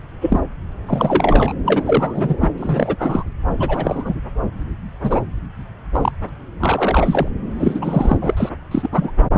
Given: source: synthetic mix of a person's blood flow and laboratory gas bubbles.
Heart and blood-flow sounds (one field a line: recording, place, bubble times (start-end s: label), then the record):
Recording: Doppler ultrasound of blood flow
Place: subclavian vein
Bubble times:
0.21-0.41 s: bubbles
0.86-1.53 s: bubbles
1.66-2.35 s: bubbles
2.40-2.48 s: bubbles
2.58-2.96 s: bubbles
2.98-3.23 s: bubbles
3.60-4.15 s: bubbles
5.03-5.21 s: bubbles
5.92-6.11 s: bubbles
6.28-6.29 s: bubbles
6.59-7.28 s: bubbles
7.59-8.17 s: bubbles
8.21-8.49 s: bubbles
8.71-8.88 s: bubbles
8.91-9.11 s: bubbles
9.34-9.37 s: bubbles
From the record:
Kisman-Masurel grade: 243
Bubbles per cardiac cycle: several, 3 to 8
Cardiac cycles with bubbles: 100%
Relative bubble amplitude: loud (0.450 to 0.775)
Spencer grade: 3 (all of the cardiac periods contain showers or single bubble signals, but not dominating or overriding the cardiac motion signals)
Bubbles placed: anywhere in the cardiac cycle